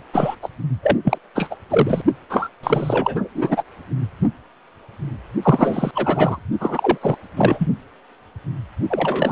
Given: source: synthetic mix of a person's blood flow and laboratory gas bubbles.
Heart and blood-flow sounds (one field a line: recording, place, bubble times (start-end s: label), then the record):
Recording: Doppler ultrasound of blood flow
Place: precordium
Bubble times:
0.12-0.35 s: bubbles
0.42-0.49 s: bubbles
0.82-0.97 s: bubbles
1.04-1.18 s: bubbles
1.35-1.55 s: bubbles
1.70-2.01 s: bubbles
2.29-2.49 s: bubbles
2.63-3.29 s: bubbles
3.34-3.64 s: bubbles
5.42-5.91 s: bubbles
5.95-6.39 s: bubbles
6.60-6.98 s: bubbles
7.02-7.16 s: bubbles
7.36-7.67 s: bubbles
8.89-9.32 s: bubbles
From the record:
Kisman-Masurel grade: 333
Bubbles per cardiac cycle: rolling drumbeat, 9 or more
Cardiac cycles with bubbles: 50 to 99%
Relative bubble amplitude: loud (0.450 to 0.775)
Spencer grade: 3 (all of the cardiac periods contain showers or single bubble signals, but not dominating or overriding the cardiac motion signals)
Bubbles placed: only in the low amplitude regions of the cardiac cycle